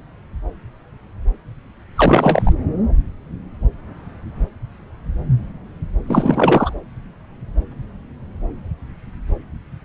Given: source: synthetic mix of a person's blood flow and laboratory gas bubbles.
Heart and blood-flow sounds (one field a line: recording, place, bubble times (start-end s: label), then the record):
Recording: Doppler ultrasound of blood flow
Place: subclavian vein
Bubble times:
1.96-2.53 s: bubbles
6.07-6.74 s: bubbles
From the record:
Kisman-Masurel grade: 213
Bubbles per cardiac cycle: several, 3 to 8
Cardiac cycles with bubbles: 1 to 10%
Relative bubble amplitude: loud (0.450 to 0.775)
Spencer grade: 1 (occasional bubble signal discernible with the cardiac motion signal, with majority of cardiac periods free of bubbles)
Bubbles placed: anywhere in the cardiac cycle